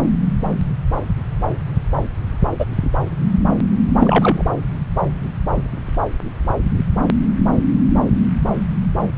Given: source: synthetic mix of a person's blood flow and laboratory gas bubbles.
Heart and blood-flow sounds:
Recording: Doppler ultrasound of blood flow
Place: subclavian vein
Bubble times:
2.60-2.66 s: bubbles
3.99-4.43 s: bubbles
From the record:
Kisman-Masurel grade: 123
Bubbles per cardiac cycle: 1 to 2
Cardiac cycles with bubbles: 10 to 50%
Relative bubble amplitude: loud (0.450 to 0.775)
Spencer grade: 2 (many but less than half of the cardiac periods contain bubble signals, singularly or in groups)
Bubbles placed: anywhere in the cardiac cycle

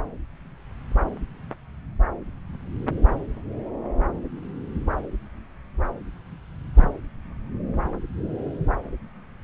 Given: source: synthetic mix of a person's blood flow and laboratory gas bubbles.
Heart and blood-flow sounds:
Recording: Doppler ultrasound of blood flow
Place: subclavian vein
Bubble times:
6.75-6.88 s: bubbles
From the record:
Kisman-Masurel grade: 121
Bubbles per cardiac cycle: 1 to 2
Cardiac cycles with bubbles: 10 to 50%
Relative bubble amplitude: barely perceptible (0.100 to 0.250)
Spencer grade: 2 (many but less than half of the cardiac periods contain bubble signals, singularly or in groups)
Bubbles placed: anywhere in the cardiac cycle

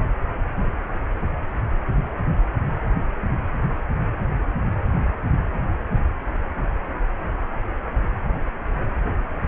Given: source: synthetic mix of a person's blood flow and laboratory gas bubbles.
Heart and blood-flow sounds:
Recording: Doppler ultrasound of blood flow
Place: precordium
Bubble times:
no bubbles
From the record:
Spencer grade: 0 (complete lack of bubble signals)

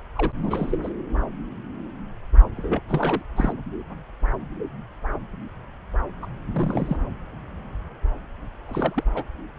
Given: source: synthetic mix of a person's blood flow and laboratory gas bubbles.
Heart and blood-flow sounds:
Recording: Doppler ultrasound of blood flow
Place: subclavian vein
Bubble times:
0.15-0.32 s: bubbles
0.38-0.78 s: bubbles
0.82-0.89 s: bubbles
2.57-2.81 s: bubbles
2.88-3.22 s: bubbles
3.36-3.52 s: bubbles
6.22-6.27 s: bubbles
6.53-6.97 s: bubbles
8.69-9.04 s: bubbles
9.14-9.24 s: bubbles
From the record:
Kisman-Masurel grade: 221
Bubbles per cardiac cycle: several, 3 to 8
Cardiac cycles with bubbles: 10 to 50%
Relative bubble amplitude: barely perceptible (0.100 to 0.250)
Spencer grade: 2 (many but less than half of the cardiac periods contain bubble signals, singularly or in groups)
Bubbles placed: anywhere in the cardiac cycle

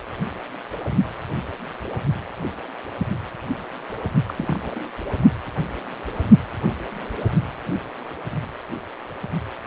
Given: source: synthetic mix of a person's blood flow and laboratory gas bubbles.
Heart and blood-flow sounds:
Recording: Doppler ultrasound of blood flow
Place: precordium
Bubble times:
4.27-4.34 s: bubbles
4.38-4.46 s: bubbles
4.48-4.59 s: bubbles
4.62-4.79 s: bubbles
From the record:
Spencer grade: 1 (occasional bubble signal discernible with the cardiac motion signal, with majority of cardiac periods free of bubbles)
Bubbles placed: only in the low amplitude regions of the cardiac cycle

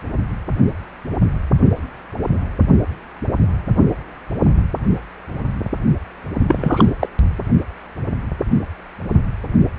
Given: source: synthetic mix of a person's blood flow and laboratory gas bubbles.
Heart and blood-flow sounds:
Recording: Doppler ultrasound of blood flow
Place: precordium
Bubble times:
6.48-6.90 s: bubbles
7.00-7.09 s: bubbles
From the record:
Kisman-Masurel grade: 213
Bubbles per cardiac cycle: several, 3 to 8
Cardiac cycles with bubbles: 1 to 10%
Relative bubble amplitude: loud (0.450 to 0.775)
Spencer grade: 1 (occasional bubble signal discernible with the cardiac motion signal, with majority of cardiac periods free of bubbles)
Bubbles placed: only in the low amplitude regions of the cardiac cycle

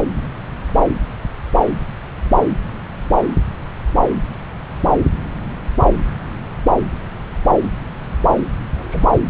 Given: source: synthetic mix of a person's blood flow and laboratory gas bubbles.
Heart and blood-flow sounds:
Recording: Doppler ultrasound of blood flow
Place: subclavian vein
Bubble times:
8.73-9.22 s: bubbles
From the record:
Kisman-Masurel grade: 111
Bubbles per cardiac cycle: 1 to 2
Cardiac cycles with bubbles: 1 to 10%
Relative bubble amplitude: barely perceptible (0.100 to 0.250)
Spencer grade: 1 (occasional bubble signal discernible with the cardiac motion signal, with majority of cardiac periods free of bubbles)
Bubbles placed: anywhere in the cardiac cycle

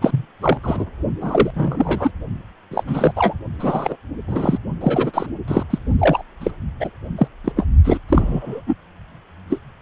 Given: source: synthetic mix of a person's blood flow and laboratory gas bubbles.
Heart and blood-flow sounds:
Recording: Doppler ultrasound of blood flow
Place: precordium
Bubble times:
0.01-0.26 s: bubbles
0.42-0.57 s: bubbles
0.62-0.85 s: bubbles
1.21-2.12 s: bubbles
2.71-2.84 s: bubbles
2.87-3.12 s: bubbles
3.16-3.34 s: bubbles
3.59-3.96 s: bubbles
4.27-4.58 s: bubbles
4.81-5.27 s: bubbles
5.48-5.63 s: bubbles
5.70-5.79 s: bubbles
5.98-6.23 s: bubbles
6.40-6.52 s: bubbles
6.79-6.90 s: bubbles
7.17-7.28 s: bubbles
7.44-7.52 s: bubbles
7.57-7.67 s: bubbles
7.84-7.99 s: bubbles
8.09-8.62 s: bubbles
8.67-8.75 s: bubbles
9.50-9.59 s: bubbles
From the record:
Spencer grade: 3 (all of the cardiac periods contain showers or single bubble signals, but not dominating or overriding the cardiac motion signals)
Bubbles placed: only in the low amplitude regions of the cardiac cycle

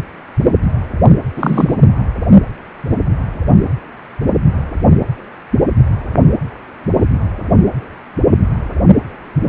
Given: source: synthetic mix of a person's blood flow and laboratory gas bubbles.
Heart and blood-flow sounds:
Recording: Doppler ultrasound of blood flow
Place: precordium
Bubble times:
1.35-1.76 s: bubbles
From the record:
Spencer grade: 1 (occasional bubble signal discernible with the cardiac motion signal, with majority of cardiac periods free of bubbles)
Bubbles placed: anywhere in the cardiac cycle

